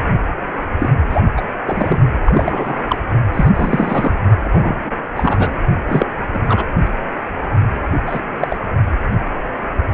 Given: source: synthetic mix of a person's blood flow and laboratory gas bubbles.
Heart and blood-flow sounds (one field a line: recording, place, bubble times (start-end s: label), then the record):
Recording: Doppler ultrasound of blood flow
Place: precordium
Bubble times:
0.78-0.90 s: bubbles
1.09-1.21 s: bubbles
1.37-1.42 s: bubbles
1.65-2.00 s: bubbles
2.25-2.96 s: bubbles
3.33-3.49 s: bubbles
3.54-4.12 s: bubbles
4.39-4.92 s: bubbles
5.17-5.60 s: bubbles
5.88-6.06 s: bubbles
6.33-6.39 s: bubbles
6.48-6.66 s: bubbles
8.07-8.21 s: bubbles
8.40-8.57 s: bubbles
From the record:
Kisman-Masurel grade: 233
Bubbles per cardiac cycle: several, 3 to 8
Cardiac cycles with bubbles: 50 to 99%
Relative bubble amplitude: loud (0.450 to 0.775)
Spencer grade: 3 (all of the cardiac periods contain showers or single bubble signals, but not dominating or overriding the cardiac motion signals)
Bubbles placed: only in the low amplitude regions of the cardiac cycle